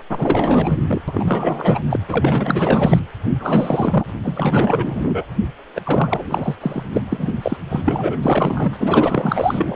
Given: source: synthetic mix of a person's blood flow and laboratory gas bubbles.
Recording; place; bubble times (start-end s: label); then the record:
Doppler ultrasound of blood flow; precordium
0.09-0.78 s: bubbles
0.86-1.01 s: bubbles
1.07-1.83 s: bubbles
1.90-2.00 s: bubbles
2.08-3.01 s: bubbles
3.29-4.05 s: bubbles
4.23-5.26 s: bubbles
5.74-5.81 s: bubbles
5.83-6.55 s: bubbles
6.60-6.83 s: bubbles
6.93-7.01 s: bubbles
7.09-7.31 s: bubbles
7.42-7.57 s: bubbles
7.69-8.17 s: bubbles
8.21-9.76 s: bubbles
From the record:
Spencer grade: 4 (maximum detectable bubble signal sounding continuously throughout systole and diastole of every cardiac period, and overriding the amplitude of the normal cardiac signals); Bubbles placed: anywhere in the cardiac cycle